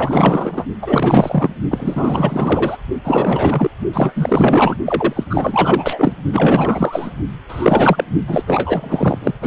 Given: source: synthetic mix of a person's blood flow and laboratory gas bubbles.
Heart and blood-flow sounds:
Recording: Doppler ultrasound of blood flow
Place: precordium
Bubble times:
0.00-0.65 s: bubbles
0.82-1.50 s: bubbles
1.70-2.77 s: bubbles
3.04-3.70 s: bubbles
3.93-4.77 s: bubbles
4.85-5.24 s: bubbles
5.29-6.12 s: bubbles
6.32-7.12 s: bubbles
7.49-8.04 s: bubbles
8.28-8.43 s: bubbles
8.46-9.18 s: bubbles
9.21-9.33 s: bubbles
9.41-9.47 s: bubbles
From the record:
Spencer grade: 4 (maximum detectable bubble signal sounding continuously throughout systole and diastole of every cardiac period, and overriding the amplitude of the normal cardiac signals)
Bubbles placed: only in the low amplitude regions of the cardiac cycle

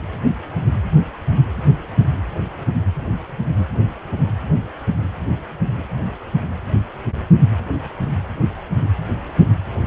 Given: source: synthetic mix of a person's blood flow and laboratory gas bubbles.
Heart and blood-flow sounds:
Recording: Doppler ultrasound of blood flow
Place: precordium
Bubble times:
no bubbles
From the record:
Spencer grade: 0 (complete lack of bubble signals)

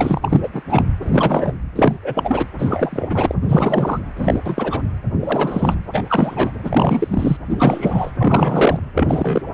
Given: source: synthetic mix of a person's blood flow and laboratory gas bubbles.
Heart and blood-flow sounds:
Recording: Doppler ultrasound of blood flow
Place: precordium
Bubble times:
0.00-0.48 s: bubbles
0.53-0.62 s: bubbles
0.70-0.82 s: bubbles
1.02-1.54 s: bubbles
1.75-1.97 s: bubbles
2.02-2.46 s: bubbles
2.58-3.35 s: bubbles
3.42-4.00 s: bubbles
4.17-4.39 s: bubbles
4.44-4.82 s: bubbles
5.19-5.75 s: bubbles
5.93-6.04 s: bubbles
6.09-6.51 s: bubbles
6.64-7.37 s: bubbles
7.50-8.12 s: bubbles
8.19-8.79 s: bubbles
8.95-9.41 s: bubbles
From the record:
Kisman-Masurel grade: 343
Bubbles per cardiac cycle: rolling drumbeat, 9 or more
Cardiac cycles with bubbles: 100%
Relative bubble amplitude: loud (0.450 to 0.775)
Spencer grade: 3 (all of the cardiac periods contain showers or single bubble signals, but not dominating or overriding the cardiac motion signals)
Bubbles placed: anywhere in the cardiac cycle

